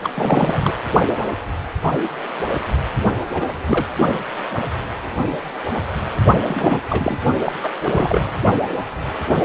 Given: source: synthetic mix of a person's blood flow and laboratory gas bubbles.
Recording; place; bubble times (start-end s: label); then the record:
Doppler ultrasound of blood flow; precordium
0.04-0.10 s: bubbles
0.14-0.72 s: bubbles
3.34-3.57 s: bubbles
3.66-3.86 s: bubbles
6.48-6.81 s: bubbles
6.89-7.18 s: bubbles
7.45-7.52 s: bubbles
7.62-7.70 s: bubbles
7.84-8.33 s: bubbles
From the record:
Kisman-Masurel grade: 222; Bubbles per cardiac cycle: several, 3 to 8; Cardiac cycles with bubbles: 10 to 50%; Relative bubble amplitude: moderate (0.250 to 0.450); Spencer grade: 2 (many but less than half of the cardiac periods contain bubble signals, singularly or in groups); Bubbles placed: only in the low amplitude regions of the cardiac cycle